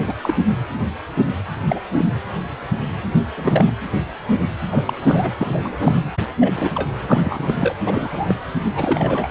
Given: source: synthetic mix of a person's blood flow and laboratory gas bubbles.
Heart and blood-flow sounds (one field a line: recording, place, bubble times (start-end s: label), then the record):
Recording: Doppler ultrasound of blood flow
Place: precordium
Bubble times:
0.02-0.13 s: bubbles
0.21-0.34 s: bubbles
1.68-1.79 s: bubbles
1.97-2.06 s: bubbles
3.37-3.73 s: bubbles
4.71-4.84 s: bubbles
4.87-4.93 s: bubbles
5.02-5.32 s: bubbles
5.38-6.00 s: bubbles
6.40-6.53 s: bubbles
6.55-6.89 s: bubbles
7.03-7.75 s: bubbles
7.86-8.35 s: bubbles
8.74-9.29 s: bubbles
From the record:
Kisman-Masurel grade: 232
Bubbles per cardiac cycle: several, 3 to 8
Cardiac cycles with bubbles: 50 to 99%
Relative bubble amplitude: moderate (0.250 to 0.450)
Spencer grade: 3 (all of the cardiac periods contain showers or single bubble signals, but not dominating or overriding the cardiac motion signals)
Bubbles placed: anywhere in the cardiac cycle